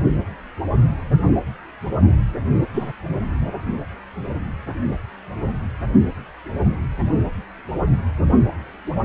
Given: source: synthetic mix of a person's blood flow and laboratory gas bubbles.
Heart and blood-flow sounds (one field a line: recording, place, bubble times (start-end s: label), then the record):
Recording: Doppler ultrasound of blood flow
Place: precordium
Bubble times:
2.73-2.92 s: bubbles
From the record:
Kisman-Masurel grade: 113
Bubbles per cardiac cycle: 1 to 2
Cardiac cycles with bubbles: 1 to 10%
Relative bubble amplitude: loud (0.450 to 0.775)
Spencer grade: 1 (occasional bubble signal discernible with the cardiac motion signal, with majority of cardiac periods free of bubbles)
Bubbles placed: anywhere in the cardiac cycle